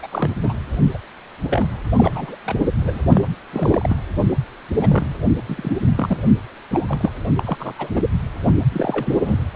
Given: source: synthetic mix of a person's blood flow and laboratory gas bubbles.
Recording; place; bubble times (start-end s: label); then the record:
Doppler ultrasound of blood flow; precordium
0.02-0.07 s: bubbles
0.12-0.31 s: bubbles
0.42-0.54 s: bubbles
0.94-0.98 s: bubbles
1.49-1.67 s: bubbles
1.96-2.37 s: bubbles
2.46-2.56 s: bubbles
2.81-3.02 s: bubbles
3.12-3.25 s: bubbles
3.52-3.96 s: bubbles
4.79-5.14 s: bubbles
5.48-5.78 s: bubbles
5.96-6.17 s: bubbles
6.25-6.33 s: bubbles
6.71-6.86 s: bubbles
6.88-7.12 s: bubbles
7.36-7.74 s: bubbles
7.78-8.01 s: bubbles
8.72-9.40 s: bubbles
From the record:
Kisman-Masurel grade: 242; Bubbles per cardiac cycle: several, 3 to 8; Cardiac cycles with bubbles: 100%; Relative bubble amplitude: moderate (0.250 to 0.450); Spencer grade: 3 (all of the cardiac periods contain showers or single bubble signals, but not dominating or overriding the cardiac motion signals); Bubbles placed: anywhere in the cardiac cycle